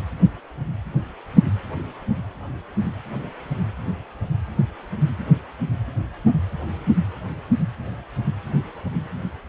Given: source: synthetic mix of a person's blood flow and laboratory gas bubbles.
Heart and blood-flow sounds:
Doppler ultrasound of blood flow; precordium
no bubbles
From the record:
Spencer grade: 0 (complete lack of bubble signals)

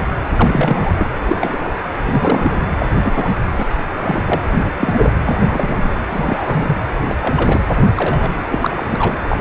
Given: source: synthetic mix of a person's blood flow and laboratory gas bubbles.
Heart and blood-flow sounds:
Doppler ultrasound of blood flow; precordium
0.00-0.12 s: bubbles
0.36-0.95 s: bubbles
0.98-1.07 s: bubbles
1.28-1.57 s: bubbles
1.60-1.70 s: bubbles
2.03-2.65 s: bubbles
2.79-2.86 s: bubbles
3.02-3.34 s: bubbles
3.58-3.63 s: bubbles
3.97-4.42 s: bubbles
4.47-4.71 s: bubbles
4.77-5.12 s: bubbles
5.22-5.97 s: bubbles
6.09-6.75 s: bubbles
7.09-7.15 s: bubbles
7.21-7.60 s: bubbles
7.67-7.85 s: bubbles
7.95-8.30 s: bubbles
8.48-8.87 s: bubbles
8.89-9.19 s: bubbles
9.29-9.38 s: bubbles
From the record:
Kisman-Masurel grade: 233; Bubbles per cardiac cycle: several, 3 to 8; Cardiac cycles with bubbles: 50 to 99%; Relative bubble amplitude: loud (0.450 to 0.775); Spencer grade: 3 (all of the cardiac periods contain showers or single bubble signals, but not dominating or overriding the cardiac motion signals); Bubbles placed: anywhere in the cardiac cycle

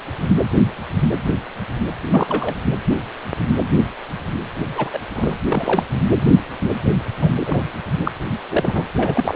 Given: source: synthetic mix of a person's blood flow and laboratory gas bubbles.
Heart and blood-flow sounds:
Doppler ultrasound of blood flow; precordium
2.10-2.54 s: bubbles
4.75-4.99 s: bubbles
5.16-5.34 s: bubbles
5.50-5.84 s: bubbles
7.21-7.31 s: bubbles
7.40-7.71 s: bubbles
8.04-8.12 s: bubbles
8.48-8.83 s: bubbles
8.96-9.36 s: bubbles
From the record:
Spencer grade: 3 (all of the cardiac periods contain showers or single bubble signals, but not dominating or overriding the cardiac motion signals); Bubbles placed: anywhere in the cardiac cycle

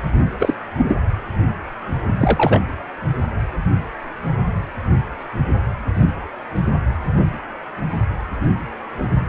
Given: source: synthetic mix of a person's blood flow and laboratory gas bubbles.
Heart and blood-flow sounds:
Doppler ultrasound of blood flow; precordium
0.39-0.54 s: bubbles
0.78-0.94 s: bubbles
2.18-2.61 s: bubbles
From the record:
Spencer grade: 1 (occasional bubble signal discernible with the cardiac motion signal, with majority of cardiac periods free of bubbles); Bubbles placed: anywhere in the cardiac cycle

